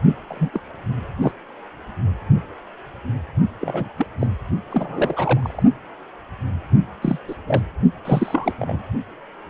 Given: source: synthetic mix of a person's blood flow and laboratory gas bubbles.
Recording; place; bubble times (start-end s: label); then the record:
Doppler ultrasound of blood flow; precordium
0.29-0.49 s: bubbles
0.54-0.60 s: bubbles
1.22-1.31 s: bubbles
3.60-3.94 s: bubbles
3.97-4.06 s: bubbles
4.19-4.27 s: bubbles
4.71-5.63 s: bubbles
7.01-7.18 s: bubbles
7.27-7.35 s: bubbles
7.47-7.62 s: bubbles
8.05-8.52 s: bubbles
8.58-8.83 s: bubbles
From the record:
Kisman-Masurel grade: 232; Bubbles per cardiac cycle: several, 3 to 8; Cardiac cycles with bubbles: 50 to 99%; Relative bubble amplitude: moderate (0.250 to 0.450); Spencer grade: 3 (all of the cardiac periods contain showers or single bubble signals, but not dominating or overriding the cardiac motion signals); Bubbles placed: only in the low amplitude regions of the cardiac cycle